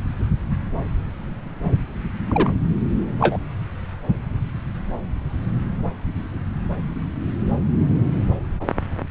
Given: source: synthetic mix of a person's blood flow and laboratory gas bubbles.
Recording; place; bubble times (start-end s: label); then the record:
Doppler ultrasound of blood flow; subclavian vein
2.29-2.53 s: bubbles
3.20-3.38 s: bubbles
From the record:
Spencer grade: 2 (many but less than half of the cardiac periods contain bubble signals, singularly or in groups); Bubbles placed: anywhere in the cardiac cycle